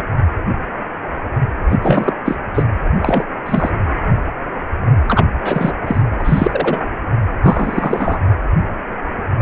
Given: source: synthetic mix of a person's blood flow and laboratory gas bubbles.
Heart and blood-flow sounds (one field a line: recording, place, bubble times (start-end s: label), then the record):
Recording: Doppler ultrasound of blood flow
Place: precordium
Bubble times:
0.00-0.02 s: bubbles
1.69-1.79 s: bubbles
1.81-2.13 s: bubbles
2.25-2.35 s: bubbles
2.54-2.63 s: bubbles
2.96-3.23 s: bubbles
3.46-3.69 s: bubbles
5.08-5.24 s: bubbles
5.42-5.75 s: bubbles
5.87-6.01 s: bubbles
6.18-6.84 s: bubbles
7.42-8.18 s: bubbles
From the record:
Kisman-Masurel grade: 233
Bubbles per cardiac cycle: several, 3 to 8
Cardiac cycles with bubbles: 50 to 99%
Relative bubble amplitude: loud (0.450 to 0.775)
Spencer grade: 3 (all of the cardiac periods contain showers or single bubble signals, but not dominating or overriding the cardiac motion signals)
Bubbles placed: anywhere in the cardiac cycle